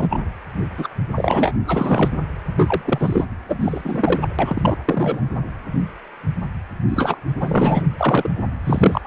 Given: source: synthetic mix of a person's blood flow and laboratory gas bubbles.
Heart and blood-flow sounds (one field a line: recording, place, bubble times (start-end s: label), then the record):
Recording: Doppler ultrasound of blood flow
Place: precordium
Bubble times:
0.00-0.22 s: bubbles
0.77-0.89 s: bubbles
1.16-1.55 s: bubbles
1.67-2.10 s: bubbles
2.56-2.81 s: bubbles
2.84-3.25 s: bubbles
3.48-4.28 s: bubbles
4.39-4.77 s: bubbles
4.85-5.21 s: bubbles
6.88-7.18 s: bubbles
7.39-7.83 s: bubbles
7.98-8.30 s: bubbles
8.63-9.01 s: bubbles
9.04-9.07 s: bubbles
From the record:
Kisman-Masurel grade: 233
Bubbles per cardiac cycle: several, 3 to 8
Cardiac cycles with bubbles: 50 to 99%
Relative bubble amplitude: loud (0.450 to 0.775)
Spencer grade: 3 (all of the cardiac periods contain showers or single bubble signals, but not dominating or overriding the cardiac motion signals)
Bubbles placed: anywhere in the cardiac cycle